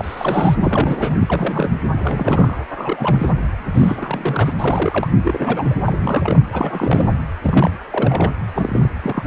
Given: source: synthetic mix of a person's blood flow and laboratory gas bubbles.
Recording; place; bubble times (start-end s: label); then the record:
Doppler ultrasound of blood flow; precordium
0.00-0.55 s: bubbles
0.59-1.17 s: bubbles
1.19-1.72 s: bubbles
1.92-2.57 s: bubbles
2.67-3.29 s: bubbles
3.74-4.54 s: bubbles
4.58-5.08 s: bubbles
5.19-5.75 s: bubbles
5.84-6.43 s: bubbles
6.52-7.12 s: bubbles
7.42-7.71 s: bubbles
7.91-8.31 s: bubbles
8.54-8.89 s: bubbles
9.03-9.23 s: bubbles
From the record:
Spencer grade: 3 (all of the cardiac periods contain showers or single bubble signals, but not dominating or overriding the cardiac motion signals); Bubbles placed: anywhere in the cardiac cycle